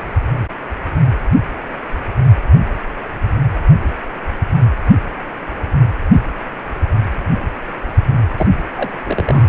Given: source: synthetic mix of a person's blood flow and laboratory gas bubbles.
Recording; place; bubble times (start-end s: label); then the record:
Doppler ultrasound of blood flow; precordium
8.37-8.47 s: bubbles
8.76-8.90 s: bubbles
9.04-9.49 s: bubbles
From the record:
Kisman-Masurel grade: 212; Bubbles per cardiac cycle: several, 3 to 8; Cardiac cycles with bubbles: 1 to 10%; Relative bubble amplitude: moderate (0.250 to 0.450); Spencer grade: 1 (occasional bubble signal discernible with the cardiac motion signal, with majority of cardiac periods free of bubbles); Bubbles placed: only in the low amplitude regions of the cardiac cycle